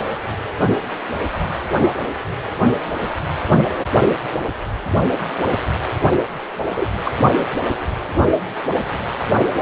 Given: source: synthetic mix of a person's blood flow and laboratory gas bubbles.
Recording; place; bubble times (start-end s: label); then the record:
Doppler ultrasound of blood flow; precordium
6.76-6.86 s: bubbles
7.04-7.11 s: bubbles
From the record:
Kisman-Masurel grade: 113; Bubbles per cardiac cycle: 1 to 2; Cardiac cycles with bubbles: 1 to 10%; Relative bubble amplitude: loud (0.450 to 0.775); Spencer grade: 1 (occasional bubble signal discernible with the cardiac motion signal, with majority of cardiac periods free of bubbles); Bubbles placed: only in the low amplitude regions of the cardiac cycle